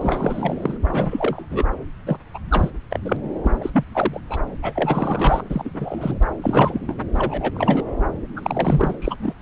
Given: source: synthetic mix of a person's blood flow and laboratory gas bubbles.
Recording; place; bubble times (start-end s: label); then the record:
Doppler ultrasound of blood flow; subclavian vein
0.00-0.78 s: bubbles
0.84-1.66 s: bubbles
2.06-2.17 s: bubbles
2.34-2.38 s: bubbles
2.50-2.71 s: bubbles
2.90-2.99 s: bubbles
3.04-3.17 s: bubbles
3.44-3.70 s: bubbles
3.73-3.84 s: bubbles
3.91-4.21 s: bubbles
4.29-4.40 s: bubbles
4.62-5.43 s: bubbles
5.50-5.70 s: bubbles
5.74-6.23 s: bubbles
6.42-6.95 s: bubbles
7.15-7.52 s: bubbles
7.54-7.82 s: bubbles
8.36-8.95 s: bubbles
9.00-9.33 s: bubbles
From the record:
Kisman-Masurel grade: 342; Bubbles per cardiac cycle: rolling drumbeat, 9 or more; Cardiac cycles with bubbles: 100%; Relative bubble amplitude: moderate (0.250 to 0.450); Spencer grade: 3 (all of the cardiac periods contain showers or single bubble signals, but not dominating or overriding the cardiac motion signals); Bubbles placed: anywhere in the cardiac cycle